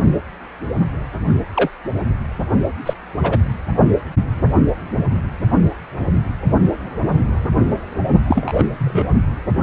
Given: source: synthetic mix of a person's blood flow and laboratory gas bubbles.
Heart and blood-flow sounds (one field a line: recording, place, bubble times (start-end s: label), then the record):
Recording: Doppler ultrasound of blood flow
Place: precordium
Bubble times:
1.54-1.69 s: bubbles
2.85-2.93 s: bubbles
3.22-3.38 s: bubbles
8.28-8.64 s: bubbles
8.77-9.09 s: bubbles
From the record:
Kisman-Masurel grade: 123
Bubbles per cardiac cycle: 1 to 2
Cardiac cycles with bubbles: 10 to 50%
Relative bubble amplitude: loud (0.450 to 0.775)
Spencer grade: 2 (many but less than half of the cardiac periods contain bubble signals, singularly or in groups)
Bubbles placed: only in the low amplitude regions of the cardiac cycle